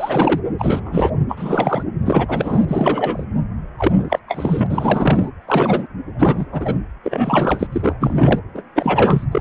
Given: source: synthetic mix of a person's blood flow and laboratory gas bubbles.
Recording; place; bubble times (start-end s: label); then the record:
Doppler ultrasound of blood flow; precordium
0.00-0.40 s: bubbles
0.58-1.10 s: bubbles
1.28-1.83 s: bubbles
2.05-2.65 s: bubbles
2.68-3.25 s: bubbles
3.78-4.19 s: bubbles
4.28-4.67 s: bubbles
4.69-5.30 s: bubbles
5.47-5.87 s: bubbles
6.18-6.46 s: bubbles
6.51-6.78 s: bubbles
7.04-7.67 s: bubbles
7.72-7.96 s: bubbles
8.00-8.39 s: bubbles
8.54-8.63 s: bubbles
8.75-9.24 s: bubbles
9.31-9.41 s: bubbles
From the record:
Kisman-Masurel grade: 343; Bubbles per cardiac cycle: rolling drumbeat, 9 or more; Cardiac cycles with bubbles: 100%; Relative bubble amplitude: loud (0.450 to 0.775); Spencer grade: 3 (all of the cardiac periods contain showers or single bubble signals, but not dominating or overriding the cardiac motion signals); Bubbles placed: anywhere in the cardiac cycle